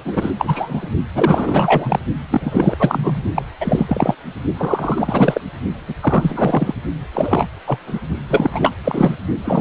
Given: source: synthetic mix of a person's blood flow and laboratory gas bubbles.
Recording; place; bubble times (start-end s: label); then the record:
Doppler ultrasound of blood flow; precordium
0.04-0.30 s: bubbles
0.39-0.89 s: bubbles
1.15-1.99 s: bubbles
2.30-2.75 s: bubbles
2.79-3.22 s: bubbles
3.34-3.42 s: bubbles
3.60-3.85 s: bubbles
3.88-4.15 s: bubbles
4.58-5.41 s: bubbles
5.88-5.94 s: bubbles
6.02-6.74 s: bubbles
7.13-7.45 s: bubbles
7.67-7.79 s: bubbles
7.86-8.00 s: bubbles
8.29-8.71 s: bubbles
8.84-9.15 s: bubbles
9.44-9.61 s: bubbles
From the record:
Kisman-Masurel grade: 343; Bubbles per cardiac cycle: rolling drumbeat, 9 or more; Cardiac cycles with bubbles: 100%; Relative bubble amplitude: loud (0.450 to 0.775); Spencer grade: 3 (all of the cardiac periods contain showers or single bubble signals, but not dominating or overriding the cardiac motion signals); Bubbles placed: only in the low amplitude regions of the cardiac cycle